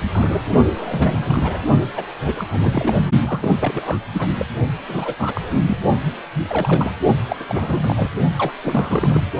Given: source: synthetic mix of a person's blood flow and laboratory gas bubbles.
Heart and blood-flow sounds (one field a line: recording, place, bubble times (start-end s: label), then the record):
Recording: Doppler ultrasound of blood flow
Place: precordium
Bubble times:
0.13-0.42 s: bubbles
0.65-0.70 s: bubbles
0.76-1.59 s: bubbles
1.96-2.04 s: bubbles
2.24-2.44 s: bubbles
2.51-2.96 s: bubbles
3.21-3.57 s: bubbles
3.59-4.01 s: bubbles
4.12-4.27 s: bubbles
4.38-4.46 s: bubbles
4.86-5.15 s: bubbles
5.18-5.77 s: bubbles
6.41-6.92 s: bubbles
7.29-7.37 s: bubbles
7.39-7.43 s: bubbles
7.48-8.10 s: bubbles
8.38-8.52 s: bubbles
8.63-9.21 s: bubbles
From the record:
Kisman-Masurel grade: 342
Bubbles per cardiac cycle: rolling drumbeat, 9 or more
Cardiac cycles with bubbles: 100%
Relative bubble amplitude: moderate (0.250 to 0.450)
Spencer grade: 3 (all of the cardiac periods contain showers or single bubble signals, but not dominating or overriding the cardiac motion signals)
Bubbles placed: only in the low amplitude regions of the cardiac cycle